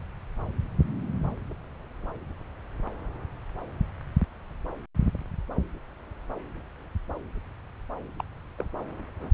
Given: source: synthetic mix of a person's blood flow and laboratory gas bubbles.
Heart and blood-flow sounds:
Doppler ultrasound of blood flow; subclavian vein
8.18-8.22 s: bubbles
8.58-8.66 s: bubbles
From the record:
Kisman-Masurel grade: 111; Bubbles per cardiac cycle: 1 to 2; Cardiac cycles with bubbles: 1 to 10%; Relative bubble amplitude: barely perceptible (0.100 to 0.250); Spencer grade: 1 (occasional bubble signal discernible with the cardiac motion signal, with majority of cardiac periods free of bubbles); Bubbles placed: anywhere in the cardiac cycle

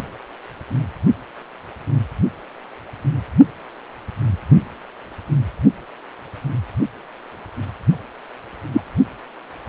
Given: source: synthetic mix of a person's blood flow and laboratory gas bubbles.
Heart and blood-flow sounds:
Doppler ultrasound of blood flow; precordium
8.73-8.83 s: bubbles
From the record:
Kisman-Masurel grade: 113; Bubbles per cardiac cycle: 1 to 2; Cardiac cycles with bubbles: 1 to 10%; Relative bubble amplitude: loud (0.450 to 0.775); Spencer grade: 1 (occasional bubble signal discernible with the cardiac motion signal, with majority of cardiac periods free of bubbles); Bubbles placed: only in the low amplitude regions of the cardiac cycle

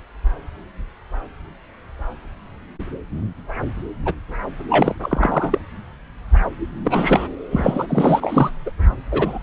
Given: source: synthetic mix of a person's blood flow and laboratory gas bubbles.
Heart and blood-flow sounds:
Doppler ultrasound of blood flow; subclavian vein
4.05-4.13 s: bubbles
4.69-4.95 s: bubbles
5.02-5.59 s: bubbles
6.84-7.28 s: bubbles
7.51-8.51 s: bubbles
8.66-8.71 s: bubbles
9.12-9.38 s: bubbles
9.41-9.43 s: bubbles
From the record:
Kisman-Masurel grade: 333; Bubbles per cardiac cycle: rolling drumbeat, 9 or more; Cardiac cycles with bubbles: 50 to 99%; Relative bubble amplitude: loud (0.450 to 0.775); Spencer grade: 3 (all of the cardiac periods contain showers or single bubble signals, but not dominating or overriding the cardiac motion signals); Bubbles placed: anywhere in the cardiac cycle

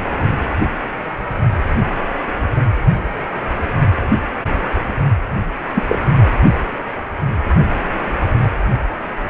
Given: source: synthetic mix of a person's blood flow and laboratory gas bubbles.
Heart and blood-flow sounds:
Doppler ultrasound of blood flow; precordium
5.75-5.83 s: bubbles
5.88-5.99 s: bubbles
From the record:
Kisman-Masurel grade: 113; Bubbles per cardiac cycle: 1 to 2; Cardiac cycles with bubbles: 1 to 10%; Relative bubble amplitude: loud (0.450 to 0.775); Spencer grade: 1 (occasional bubble signal discernible with the cardiac motion signal, with majority of cardiac periods free of bubbles); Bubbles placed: only in the low amplitude regions of the cardiac cycle

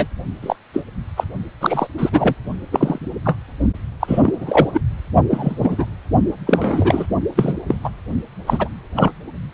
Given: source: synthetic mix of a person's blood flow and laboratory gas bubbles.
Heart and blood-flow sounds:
Doppler ultrasound of blood flow; precordium
0.00-0.06 s: bubbles
0.42-0.55 s: bubbles
0.73-0.84 s: bubbles
1.17-1.24 s: bubbles
1.60-1.87 s: bubbles
1.98-2.35 s: bubbles
2.72-2.98 s: bubbles
3.25-3.36 s: bubbles
4.00-4.69 s: bubbles
4.73-4.81 s: bubbles
5.29-5.85 s: bubbles
6.46-7.06 s: bubbles
7.35-7.53 s: bubbles
7.67-7.75 s: bubbles
7.83-7.90 s: bubbles
8.46-8.69 s: bubbles
8.95-9.11 s: bubbles
From the record:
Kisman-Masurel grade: 243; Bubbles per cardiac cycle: several, 3 to 8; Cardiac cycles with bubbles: 100%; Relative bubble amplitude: loud (0.450 to 0.775); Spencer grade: 3 (all of the cardiac periods contain showers or single bubble signals, but not dominating or overriding the cardiac motion signals); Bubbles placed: only in the low amplitude regions of the cardiac cycle

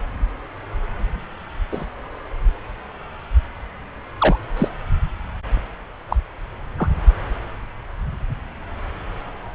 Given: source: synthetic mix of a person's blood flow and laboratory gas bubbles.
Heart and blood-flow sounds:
Doppler ultrasound of blood flow; subclavian vein
1.71-1.86 s: bubbles
4.18-4.37 s: bubbles
4.56-4.68 s: bubbles
6.08-6.17 s: bubbles
6.78-6.89 s: bubbles
From the record:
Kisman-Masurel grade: 122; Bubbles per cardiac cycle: 1 to 2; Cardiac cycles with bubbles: 10 to 50%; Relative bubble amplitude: moderate (0.250 to 0.450); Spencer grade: 2 (many but less than half of the cardiac periods contain bubble signals, singularly or in groups); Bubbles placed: anywhere in the cardiac cycle

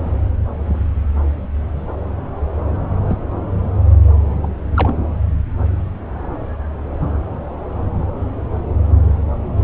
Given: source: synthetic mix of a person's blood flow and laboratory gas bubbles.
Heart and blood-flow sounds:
Doppler ultrasound of blood flow; subclavian vein
3.08-3.17 s: bubbles
4.43-4.47 s: bubbles
4.75-4.94 s: bubbles
From the record:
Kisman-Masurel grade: 122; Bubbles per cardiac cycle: 1 to 2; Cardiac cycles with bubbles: 10 to 50%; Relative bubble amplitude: moderate (0.250 to 0.450); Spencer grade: 2 (many but less than half of the cardiac periods contain bubble signals, singularly or in groups); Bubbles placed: anywhere in the cardiac cycle

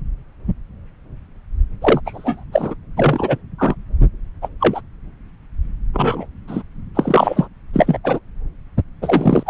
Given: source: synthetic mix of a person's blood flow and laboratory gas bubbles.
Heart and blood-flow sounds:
Doppler ultrasound of blood flow; subclavian vein
1.81-2.00 s: bubbles
2.06-2.43 s: bubbles
2.53-2.75 s: bubbles
2.97-3.38 s: bubbles
3.58-3.75 s: bubbles
4.42-4.48 s: bubbles
4.60-4.81 s: bubbles
5.93-6.26 s: bubbles
6.47-6.62 s: bubbles
6.94-7.48 s: bubbles
7.71-7.98 s: bubbles
8.04-8.20 s: bubbles
9.02-9.43 s: bubbles
9.46-9.50 s: bubbles
From the record:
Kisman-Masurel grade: 233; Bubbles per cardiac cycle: several, 3 to 8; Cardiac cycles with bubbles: 50 to 99%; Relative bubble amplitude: loud (0.450 to 0.775); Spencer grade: 3 (all of the cardiac periods contain showers or single bubble signals, but not dominating or overriding the cardiac motion signals); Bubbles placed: anywhere in the cardiac cycle

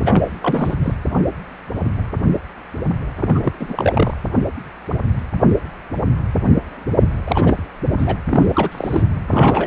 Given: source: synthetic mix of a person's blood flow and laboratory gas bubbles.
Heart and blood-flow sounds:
Doppler ultrasound of blood flow; precordium
0.05-0.32 s: bubbles
0.41-0.74 s: bubbles
0.83-0.94 s: bubbles
3.20-3.52 s: bubbles
3.59-4.17 s: bubbles
7.26-7.63 s: bubbles
7.91-8.18 s: bubbles
8.28-9.03 s: bubbles
9.28-9.67 s: bubbles
From the record:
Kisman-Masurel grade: 332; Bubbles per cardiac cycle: rolling drumbeat, 9 or more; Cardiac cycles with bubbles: 50 to 99%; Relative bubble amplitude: moderate (0.250 to 0.450); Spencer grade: 3 (all of the cardiac periods contain showers or single bubble signals, but not dominating or overriding the cardiac motion signals); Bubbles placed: anywhere in the cardiac cycle

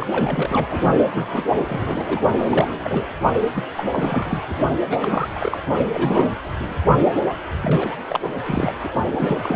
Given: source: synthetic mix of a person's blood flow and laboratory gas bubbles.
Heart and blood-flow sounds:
Doppler ultrasound of blood flow; precordium
0.00-0.07 s: bubbles
0.11-0.67 s: bubbles
0.70-0.80 s: bubbles
1.15-1.43 s: bubbles
1.56-1.62 s: bubbles
1.67-2.21 s: bubbles
2.38-2.46 s: bubbles
2.49-2.73 s: bubbles
2.84-3.05 s: bubbles
3.55-3.63 s: bubbles
3.77-3.84 s: bubbles
3.92-4.42 s: bubbles
4.50-4.55 s: bubbles
4.90-5.60 s: bubbles
5.93-6.29 s: bubbles
6.60-6.75 s: bubbles
7.61-7.96 s: bubbles
8.09-8.30 s: bubbles
8.43-8.72 s: bubbles
8.84-8.88 s: bubbles
9.11-9.56 s: bubbles
From the record:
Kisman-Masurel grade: 342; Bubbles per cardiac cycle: rolling drumbeat, 9 or more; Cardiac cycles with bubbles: 100%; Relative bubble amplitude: moderate (0.250 to 0.450); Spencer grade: 3 (all of the cardiac periods contain showers or single bubble signals, but not dominating or overriding the cardiac motion signals); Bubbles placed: only in the low amplitude regions of the cardiac cycle

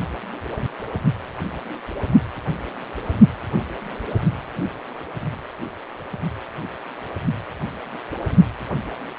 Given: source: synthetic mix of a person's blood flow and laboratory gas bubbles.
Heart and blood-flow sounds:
Doppler ultrasound of blood flow; precordium
no bubbles
From the record:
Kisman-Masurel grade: 000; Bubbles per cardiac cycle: 0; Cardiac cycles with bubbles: 0%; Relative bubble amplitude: no bubbles discernible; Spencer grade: 0 (complete lack of bubble signals)

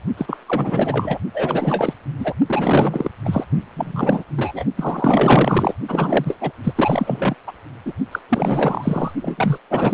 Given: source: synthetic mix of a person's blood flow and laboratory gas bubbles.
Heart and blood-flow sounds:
Doppler ultrasound of blood flow; precordium
0.17-0.37 s: bubbles
0.46-1.18 s: bubbles
1.33-1.94 s: bubbles
2.19-2.33 s: bubbles
2.46-3.09 s: bubbles
3.25-3.44 s: bubbles
3.76-4.24 s: bubbles
4.36-4.65 s: bubbles
4.77-5.75 s: bubbles
5.88-6.37 s: bubbles
6.41-6.52 s: bubbles
6.64-7.35 s: bubbles
7.47-7.53 s: bubbles
7.86-7.93 s: bubbles
8.11-8.19 s: bubbles
8.29-9.12 s: bubbles
9.21-9.58 s: bubbles
9.70-9.94 s: bubbles
From the record:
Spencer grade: 4 (maximum detectable bubble signal sounding continuously throughout systole and diastole of every cardiac period, and overriding the amplitude of the normal cardiac signals); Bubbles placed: only in the low amplitude regions of the cardiac cycle

